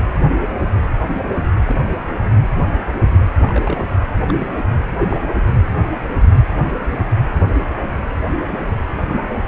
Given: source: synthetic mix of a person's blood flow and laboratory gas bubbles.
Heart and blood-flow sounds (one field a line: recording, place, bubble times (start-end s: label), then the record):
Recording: Doppler ultrasound of blood flow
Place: precordium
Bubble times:
1.67-1.76 s: bubbles
3.45-3.84 s: bubbles
4.28-4.34 s: bubbles
4.40-4.48 s: bubbles
4.99-5.16 s: bubbles
From the record:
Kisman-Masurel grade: 121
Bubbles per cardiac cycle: 1 to 2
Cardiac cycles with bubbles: 10 to 50%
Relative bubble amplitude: barely perceptible (0.100 to 0.250)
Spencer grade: 2 (many but less than half of the cardiac periods contain bubble signals, singularly or in groups)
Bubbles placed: anywhere in the cardiac cycle